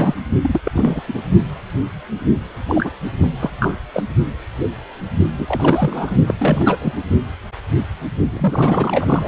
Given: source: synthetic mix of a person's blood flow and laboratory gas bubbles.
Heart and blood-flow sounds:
Doppler ultrasound of blood flow; precordium
0.00-0.15 s: bubbles
0.41-0.60 s: bubbles
0.64-0.71 s: bubbles
0.74-1.02 s: bubbles
1.08-1.20 s: bubbles
2.67-2.91 s: bubbles
3.18-3.30 s: bubbles
3.39-3.50 s: bubbles
3.60-3.78 s: bubbles
3.93-4.04 s: bubbles
5.38-6.17 s: bubbles
6.26-6.34 s: bubbles
6.39-6.78 s: bubbles
6.81-6.93 s: bubbles
8.29-9.28 s: bubbles
From the record:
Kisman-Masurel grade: 333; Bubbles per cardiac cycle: rolling drumbeat, 9 or more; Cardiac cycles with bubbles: 50 to 99%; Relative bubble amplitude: loud (0.450 to 0.775); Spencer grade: 3 (all of the cardiac periods contain showers or single bubble signals, but not dominating or overriding the cardiac motion signals); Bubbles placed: only in the low amplitude regions of the cardiac cycle

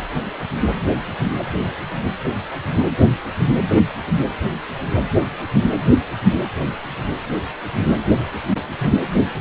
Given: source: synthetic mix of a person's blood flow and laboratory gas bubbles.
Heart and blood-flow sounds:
Doppler ultrasound of blood flow; precordium
9.18-9.27 s: bubbles
From the record:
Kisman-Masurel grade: 112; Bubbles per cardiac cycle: 1 to 2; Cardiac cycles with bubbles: 1 to 10%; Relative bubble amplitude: moderate (0.250 to 0.450); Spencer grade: 1 (occasional bubble signal discernible with the cardiac motion signal, with majority of cardiac periods free of bubbles); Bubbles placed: anywhere in the cardiac cycle

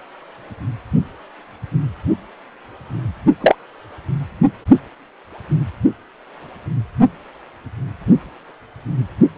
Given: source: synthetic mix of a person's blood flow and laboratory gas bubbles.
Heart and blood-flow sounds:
Doppler ultrasound of blood flow; precordium
3.41-3.56 s: bubbles
From the record:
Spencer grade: 2 (many but less than half of the cardiac periods contain bubble signals, singularly or in groups); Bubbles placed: only in the low amplitude regions of the cardiac cycle

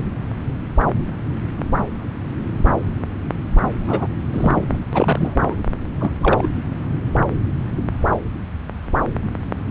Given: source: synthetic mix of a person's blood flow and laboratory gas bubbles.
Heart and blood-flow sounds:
Doppler ultrasound of blood flow; subclavian vein
3.88-4.07 s: bubbles
4.32-4.78 s: bubbles
4.92-5.55 s: bubbles
6.00-6.11 s: bubbles
6.21-6.46 s: bubbles
From the record:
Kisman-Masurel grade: 222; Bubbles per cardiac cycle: several, 3 to 8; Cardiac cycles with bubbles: 10 to 50%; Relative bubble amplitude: moderate (0.250 to 0.450); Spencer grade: 2 (many but less than half of the cardiac periods contain bubble signals, singularly or in groups); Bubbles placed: anywhere in the cardiac cycle

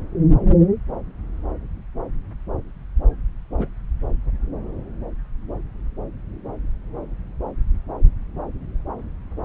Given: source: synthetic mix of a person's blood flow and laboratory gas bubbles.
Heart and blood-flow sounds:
Doppler ultrasound of blood flow; subclavian vein
3.58-3.68 s: bubbles
From the record:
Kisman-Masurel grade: 111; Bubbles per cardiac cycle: 1 to 2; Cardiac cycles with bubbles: 1 to 10%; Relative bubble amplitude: barely perceptible (0.100 to 0.250); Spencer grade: 1 (occasional bubble signal discernible with the cardiac motion signal, with majority of cardiac periods free of bubbles); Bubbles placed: anywhere in the cardiac cycle

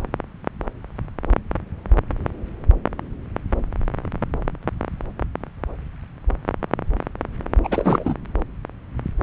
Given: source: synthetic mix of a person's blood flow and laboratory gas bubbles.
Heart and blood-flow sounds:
Doppler ultrasound of blood flow; subclavian vein
7.63-8.16 s: bubbles
From the record:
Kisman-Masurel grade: 222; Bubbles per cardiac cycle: several, 3 to 8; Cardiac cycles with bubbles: 10 to 50%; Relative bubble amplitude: moderate (0.250 to 0.450); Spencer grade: 2 (many but less than half of the cardiac periods contain bubble signals, singularly or in groups); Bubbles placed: anywhere in the cardiac cycle

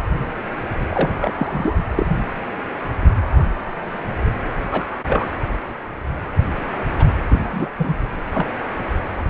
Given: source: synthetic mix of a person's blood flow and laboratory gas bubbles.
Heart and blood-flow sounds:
Doppler ultrasound of blood flow; precordium
0.89-1.75 s: bubbles
1.96-2.06 s: bubbles
4.72-4.85 s: bubbles
5.07-5.27 s: bubbles
6.99-7.05 s: bubbles
7.29-7.69 s: bubbles
7.79-7.95 s: bubbles
8.33-8.48 s: bubbles
From the record:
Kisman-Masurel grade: 222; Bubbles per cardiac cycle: several, 3 to 8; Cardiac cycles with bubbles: 10 to 50%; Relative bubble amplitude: moderate (0.250 to 0.450); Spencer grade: 2 (many but less than half of the cardiac periods contain bubble signals, singularly or in groups); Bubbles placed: anywhere in the cardiac cycle

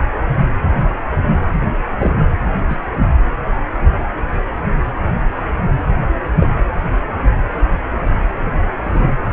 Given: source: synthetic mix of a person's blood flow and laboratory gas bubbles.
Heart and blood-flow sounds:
Doppler ultrasound of blood flow; precordium
1.99-2.12 s: bubbles
2.69-2.76 s: bubbles
6.37-6.47 s: bubbles
8.46-8.53 s: bubbles
8.84-9.12 s: bubbles
From the record:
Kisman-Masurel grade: 122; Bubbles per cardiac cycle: 1 to 2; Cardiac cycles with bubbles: 10 to 50%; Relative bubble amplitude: moderate (0.250 to 0.450); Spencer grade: 2 (many but less than half of the cardiac periods contain bubble signals, singularly or in groups); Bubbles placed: anywhere in the cardiac cycle

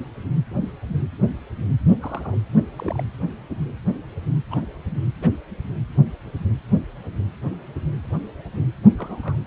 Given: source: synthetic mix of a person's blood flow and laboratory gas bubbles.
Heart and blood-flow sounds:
Doppler ultrasound of blood flow; precordium
2.01-2.39 s: bubbles
2.54-2.61 s: bubbles
2.77-3.04 s: bubbles
4.50-4.65 s: bubbles
5.22-5.29 s: bubbles
8.98-9.37 s: bubbles
From the record:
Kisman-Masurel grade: 121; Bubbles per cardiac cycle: 1 to 2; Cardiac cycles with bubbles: 10 to 50%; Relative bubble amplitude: barely perceptible (0.100 to 0.250); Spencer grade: 2 (many but less than half of the cardiac periods contain bubble signals, singularly or in groups); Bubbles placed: anywhere in the cardiac cycle

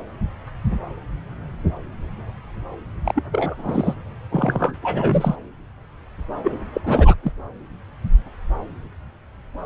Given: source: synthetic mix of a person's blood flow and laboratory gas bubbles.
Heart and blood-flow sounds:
Doppler ultrasound of blood flow; subclavian vein
3.06-3.24 s: bubbles
3.32-3.94 s: bubbles
4.31-4.75 s: bubbles
4.82-5.35 s: bubbles
6.43-6.58 s: bubbles
6.73-6.81 s: bubbles
6.83-7.14 s: bubbles
7.23-7.31 s: bubbles
From the record:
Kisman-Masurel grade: 222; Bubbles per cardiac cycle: several, 3 to 8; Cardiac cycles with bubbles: 10 to 50%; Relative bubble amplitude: moderate (0.250 to 0.450); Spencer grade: 2 (many but less than half of the cardiac periods contain bubble signals, singularly or in groups); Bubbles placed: anywhere in the cardiac cycle

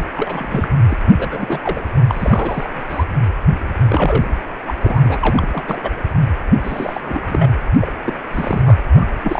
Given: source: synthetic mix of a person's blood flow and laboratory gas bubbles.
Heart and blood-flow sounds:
Doppler ultrasound of blood flow; precordium
0.00-0.04 s: bubbles
0.12-0.68 s: bubbles
0.88-0.97 s: bubbles
1.06-1.12 s: bubbles
1.18-1.59 s: bubbles
1.63-1.84 s: bubbles
2.08-3.05 s: bubbles
3.89-4.26 s: bubbles
4.67-4.74 s: bubbles
4.81-5.17 s: bubbles
5.21-5.47 s: bubbles
5.51-5.80 s: bubbles
5.83-5.92 s: bubbles
6.63-7.50 s: bubbles
7.80-7.93 s: bubbles
8.04-8.14 s: bubbles
8.33-8.77 s: bubbles
8.93-9.06 s: bubbles
9.23-9.39 s: bubbles
From the record:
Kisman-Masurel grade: 342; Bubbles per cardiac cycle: rolling drumbeat, 9 or more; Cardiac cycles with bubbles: 100%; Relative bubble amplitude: moderate (0.250 to 0.450); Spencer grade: 3 (all of the cardiac periods contain showers or single bubble signals, but not dominating or overriding the cardiac motion signals); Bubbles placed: anywhere in the cardiac cycle

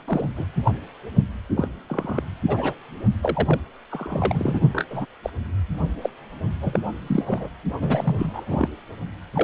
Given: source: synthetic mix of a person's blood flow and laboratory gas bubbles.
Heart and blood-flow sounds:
Doppler ultrasound of blood flow; precordium
0.07-0.28 s: bubbles
0.36-0.47 s: bubbles
0.64-0.72 s: bubbles
1.56-1.68 s: bubbles
1.86-2.23 s: bubbles
2.47-2.73 s: bubbles
3.22-3.60 s: bubbles
3.91-4.60 s: bubbles
4.73-4.85 s: bubbles
4.90-5.06 s: bubbles
5.23-5.30 s: bubbles
6.01-6.10 s: bubbles
6.62-6.79 s: bubbles
7.00-7.49 s: bubbles
7.80-8.68 s: bubbles
9.33-9.44 s: bubbles
From the record:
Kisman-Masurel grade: 242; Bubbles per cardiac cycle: several, 3 to 8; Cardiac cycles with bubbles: 100%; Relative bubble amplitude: moderate (0.250 to 0.450); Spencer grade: 3 (all of the cardiac periods contain showers or single bubble signals, but not dominating or overriding the cardiac motion signals); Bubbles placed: only in the low amplitude regions of the cardiac cycle

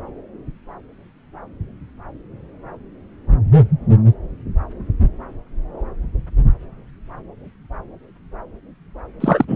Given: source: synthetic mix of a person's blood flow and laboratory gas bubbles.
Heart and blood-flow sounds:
Doppler ultrasound of blood flow; subclavian vein
9.20-9.45 s: bubbles
9.48-9.56 s: bubbles
From the record:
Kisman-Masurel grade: 223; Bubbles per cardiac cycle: several, 3 to 8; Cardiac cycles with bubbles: 10 to 50%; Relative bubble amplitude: loud (0.450 to 0.775); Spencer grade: 2 (many but less than half of the cardiac periods contain bubble signals, singularly or in groups); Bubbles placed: anywhere in the cardiac cycle

